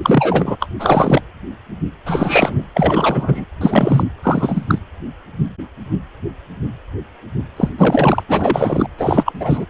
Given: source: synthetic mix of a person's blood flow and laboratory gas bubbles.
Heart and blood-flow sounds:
Doppler ultrasound of blood flow; precordium
0.03-0.56 s: bubbles
0.59-0.67 s: bubbles
0.79-1.21 s: bubbles
2.06-2.65 s: bubbles
2.74-3.45 s: bubbles
3.61-4.04 s: bubbles
4.22-4.79 s: bubbles
7.56-7.69 s: bubbles
7.77-8.23 s: bubbles
8.29-8.88 s: bubbles
8.97-9.66 s: bubbles
From the record:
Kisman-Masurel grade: 333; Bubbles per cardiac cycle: rolling drumbeat, 9 or more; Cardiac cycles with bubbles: 50 to 99%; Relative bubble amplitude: loud (0.450 to 0.775); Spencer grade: 3 (all of the cardiac periods contain showers or single bubble signals, but not dominating or overriding the cardiac motion signals); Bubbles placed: anywhere in the cardiac cycle

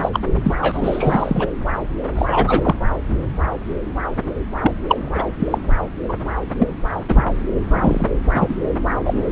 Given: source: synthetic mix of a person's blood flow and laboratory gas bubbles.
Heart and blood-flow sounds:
Doppler ultrasound of blood flow; subclavian vein
0.02-0.09 s: bubbles
0.13-0.20 s: bubbles
0.44-0.54 s: bubbles
0.61-1.47 s: bubbles
2.15-2.75 s: bubbles
4.62-4.71 s: bubbles
4.88-4.97 s: bubbles
5.05-5.26 s: bubbles
5.39-5.58 s: bubbles
6.08-6.14 s: bubbles
6.58-6.70 s: bubbles
7.08-7.25 s: bubbles
7.70-8.06 s: bubbles
8.33-8.46 s: bubbles
8.48-8.54 s: bubbles
9.05-9.23 s: bubbles
From the record:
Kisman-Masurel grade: 233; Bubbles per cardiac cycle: several, 3 to 8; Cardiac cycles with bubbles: 50 to 99%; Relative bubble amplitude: loud (0.450 to 0.775); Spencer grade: 3 (all of the cardiac periods contain showers or single bubble signals, but not dominating or overriding the cardiac motion signals); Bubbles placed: anywhere in the cardiac cycle

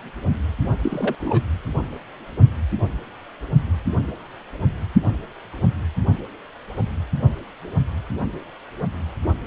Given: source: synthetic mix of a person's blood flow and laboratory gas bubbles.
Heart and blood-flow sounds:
Doppler ultrasound of blood flow; precordium
0.82-1.15 s: bubbles
1.20-1.41 s: bubbles
From the record:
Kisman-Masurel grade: 212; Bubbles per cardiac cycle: several, 3 to 8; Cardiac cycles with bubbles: 1 to 10%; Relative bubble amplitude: moderate (0.250 to 0.450); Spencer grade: 1 (occasional bubble signal discernible with the cardiac motion signal, with majority of cardiac periods free of bubbles); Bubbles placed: anywhere in the cardiac cycle

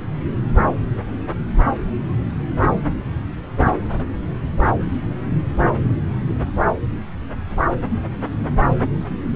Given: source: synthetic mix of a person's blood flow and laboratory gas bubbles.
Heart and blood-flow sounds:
Doppler ultrasound of blood flow; subclavian vein
4.57-4.67 s: bubbles
5.73-5.96 s: bubbles
From the record:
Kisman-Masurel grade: 111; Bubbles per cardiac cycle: 1 to 2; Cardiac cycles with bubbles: 1 to 10%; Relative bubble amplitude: barely perceptible (0.100 to 0.250); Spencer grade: 1 (occasional bubble signal discernible with the cardiac motion signal, with majority of cardiac periods free of bubbles); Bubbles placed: anywhere in the cardiac cycle

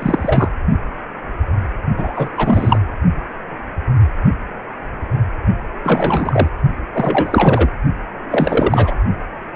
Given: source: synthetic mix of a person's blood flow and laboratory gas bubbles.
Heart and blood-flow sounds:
Doppler ultrasound of blood flow; precordium
0.00-0.48 s: bubbles
1.97-2.30 s: bubbles
2.37-2.79 s: bubbles
5.84-6.49 s: bubbles
6.92-7.68 s: bubbles
8.30-8.94 s: bubbles
From the record:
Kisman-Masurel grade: 233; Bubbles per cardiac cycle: several, 3 to 8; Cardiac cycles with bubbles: 50 to 99%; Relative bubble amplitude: loud (0.450 to 0.775); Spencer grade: 3 (all of the cardiac periods contain showers or single bubble signals, but not dominating or overriding the cardiac motion signals); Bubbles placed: only in the low amplitude regions of the cardiac cycle

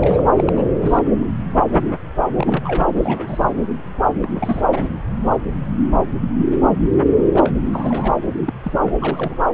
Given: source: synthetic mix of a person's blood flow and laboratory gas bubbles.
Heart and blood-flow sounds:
Doppler ultrasound of blood flow; subclavian vein
0.00-0.22 s: bubbles
0.36-0.53 s: bubbles
0.55-1.05 s: bubbles
2.34-2.85 s: bubbles
2.95-3.48 s: bubbles
4.13-4.62 s: bubbles
4.72-4.89 s: bubbles
7.34-7.52 s: bubbles
7.72-8.19 s: bubbles
8.46-8.53 s: bubbles
8.63-8.73 s: bubbles
8.78-8.94 s: bubbles
9.02-9.45 s: bubbles
From the record:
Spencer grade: 3 (all of the cardiac periods contain showers or single bubble signals, but not dominating or overriding the cardiac motion signals); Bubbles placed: anywhere in the cardiac cycle

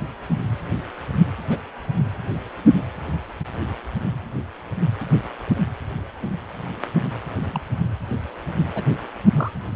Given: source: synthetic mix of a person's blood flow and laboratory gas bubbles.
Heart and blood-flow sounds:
Doppler ultrasound of blood flow; precordium
1.49-1.57 s: bubbles
7.35-7.61 s: bubbles
8.75-8.83 s: bubbles
9.36-9.51 s: bubbles
From the record:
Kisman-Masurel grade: 122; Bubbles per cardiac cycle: 1 to 2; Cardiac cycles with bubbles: 10 to 50%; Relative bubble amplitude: moderate (0.250 to 0.450); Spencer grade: 2 (many but less than half of the cardiac periods contain bubble signals, singularly or in groups); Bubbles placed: anywhere in the cardiac cycle

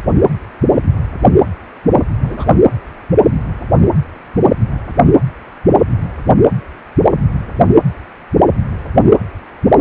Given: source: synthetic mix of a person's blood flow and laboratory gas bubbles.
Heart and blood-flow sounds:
Doppler ultrasound of blood flow; precordium
2.24-2.54 s: bubbles
From the record:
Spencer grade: 1 (occasional bubble signal discernible with the cardiac motion signal, with majority of cardiac periods free of bubbles); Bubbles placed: anywhere in the cardiac cycle

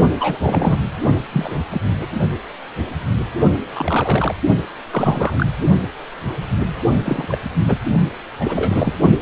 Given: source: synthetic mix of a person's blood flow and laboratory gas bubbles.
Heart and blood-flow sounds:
Doppler ultrasound of blood flow; precordium
0.19-0.78 s: bubbles
1.32-1.58 s: bubbles
1.70-1.80 s: bubbles
1.99-2.06 s: bubbles
3.72-4.35 s: bubbles
4.91-5.46 s: bubbles
7.04-7.39 s: bubbles
7.66-7.78 s: bubbles
8.39-8.91 s: bubbles
From the record:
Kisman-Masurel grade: 232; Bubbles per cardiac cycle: several, 3 to 8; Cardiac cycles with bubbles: 50 to 99%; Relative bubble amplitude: moderate (0.250 to 0.450); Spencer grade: 3 (all of the cardiac periods contain showers or single bubble signals, but not dominating or overriding the cardiac motion signals); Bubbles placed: only in the low amplitude regions of the cardiac cycle

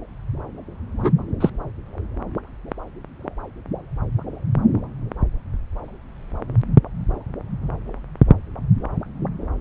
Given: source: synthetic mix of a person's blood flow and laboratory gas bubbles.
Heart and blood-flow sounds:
Doppler ultrasound of blood flow; subclavian vein
1.03-1.12 s: bubbles
1.40-1.50 s: bubbles
From the record:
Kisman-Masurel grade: 122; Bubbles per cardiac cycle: 1 to 2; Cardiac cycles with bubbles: 10 to 50%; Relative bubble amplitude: moderate (0.250 to 0.450); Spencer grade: 2 (many but less than half of the cardiac periods contain bubble signals, singularly or in groups); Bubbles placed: anywhere in the cardiac cycle

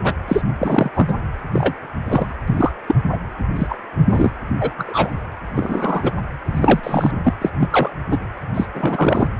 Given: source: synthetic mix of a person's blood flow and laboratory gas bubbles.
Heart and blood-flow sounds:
Doppler ultrasound of blood flow; precordium
0.04-0.14 s: bubbles
0.28-0.42 s: bubbles
0.59-0.90 s: bubbles
0.94-1.15 s: bubbles
1.52-1.76 s: bubbles
2.06-2.36 s: bubbles
2.48-2.72 s: bubbles
2.87-2.95 s: bubbles
3.12-3.18 s: bubbles
3.56-3.76 s: bubbles
4.08-4.30 s: bubbles
4.60-4.71 s: bubbles
4.78-5.20 s: bubbles
5.56-6.12 s: bubbles
6.44-6.80 s: bubbles
6.83-7.11 s: bubbles
7.24-7.34 s: bubbles
7.41-7.50 s: bubbles
7.60-7.91 s: bubbles
8.10-8.17 s: bubbles
8.54-8.66 s: bubbles
8.74-9.27 s: bubbles
From the record:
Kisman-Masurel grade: 243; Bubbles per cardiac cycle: several, 3 to 8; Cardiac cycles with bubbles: 100%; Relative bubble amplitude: loud (0.450 to 0.775); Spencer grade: 3 (all of the cardiac periods contain showers or single bubble signals, but not dominating or overriding the cardiac motion signals); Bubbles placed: anywhere in the cardiac cycle

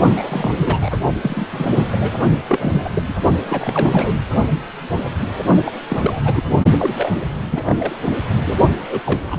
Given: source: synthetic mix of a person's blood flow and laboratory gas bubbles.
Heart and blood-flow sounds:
Doppler ultrasound of blood flow; precordium
0.15-0.98 s: bubbles
1.21-1.89 s: bubbles
1.91-1.97 s: bubbles
2.02-2.10 s: bubbles
2.48-2.90 s: bubbles
2.94-3.03 s: bubbles
3.08-3.14 s: bubbles
3.48-4.14 s: bubbles
5.65-5.71 s: bubbles
5.89-6.43 s: bubbles
6.77-7.11 s: bubbles
7.51-7.96 s: bubbles
8.45-8.58 s: bubbles
8.89-9.00 s: bubbles
9.05-9.20 s: bubbles
9.27-9.39 s: bubbles
From the record:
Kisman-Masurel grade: 332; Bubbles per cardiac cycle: rolling drumbeat, 9 or more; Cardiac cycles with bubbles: 50 to 99%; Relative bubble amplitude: moderate (0.250 to 0.450); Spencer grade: 3 (all of the cardiac periods contain showers or single bubble signals, but not dominating or overriding the cardiac motion signals); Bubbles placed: only in the low amplitude regions of the cardiac cycle

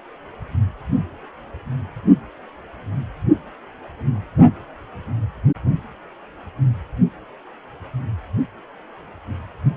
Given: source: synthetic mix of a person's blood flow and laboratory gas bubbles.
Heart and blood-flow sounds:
Doppler ultrasound of blood flow; precordium
no bubbles
From the record:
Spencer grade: 0 (complete lack of bubble signals)

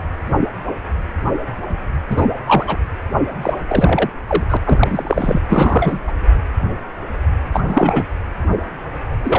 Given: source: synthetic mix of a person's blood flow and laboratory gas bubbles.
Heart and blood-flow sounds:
Doppler ultrasound of blood flow; precordium
2.10-2.27 s: bubbles
2.47-2.77 s: bubbles
3.42-3.54 s: bubbles
3.68-4.10 s: bubbles
4.27-4.43 s: bubbles
4.49-4.57 s: bubbles
4.66-5.42 s: bubbles
5.49-5.99 s: bubbles
6.07-6.12 s: bubbles
7.53-8.05 s: bubbles
9.23-9.38 s: bubbles
From the record:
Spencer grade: 3 (all of the cardiac periods contain showers or single bubble signals, but not dominating or overriding the cardiac motion signals); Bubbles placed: anywhere in the cardiac cycle

